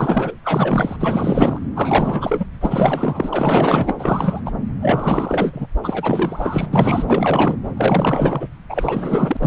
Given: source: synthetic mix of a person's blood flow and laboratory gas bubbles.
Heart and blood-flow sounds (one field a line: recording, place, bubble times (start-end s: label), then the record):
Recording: Doppler ultrasound of blood flow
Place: subclavian vein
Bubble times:
0.00-0.35 s: bubbles
0.43-0.97 s: bubbles
1.00-1.59 s: bubbles
1.75-2.45 s: bubbles
2.60-3.94 s: bubbles
3.98-4.41 s: bubbles
4.46-4.51 s: bubbles
4.82-5.67 s: bubbles
5.83-6.68 s: bubbles
6.72-7.04 s: bubbles
7.07-7.58 s: bubbles
7.77-8.48 s: bubbles
8.69-9.37 s: bubbles
9.40-9.47 s: bubbles
From the record:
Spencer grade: 4 (maximum detectable bubble signal sounding continuously throughout systole and diastole of every cardiac period, and overriding the amplitude of the normal cardiac signals)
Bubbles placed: anywhere in the cardiac cycle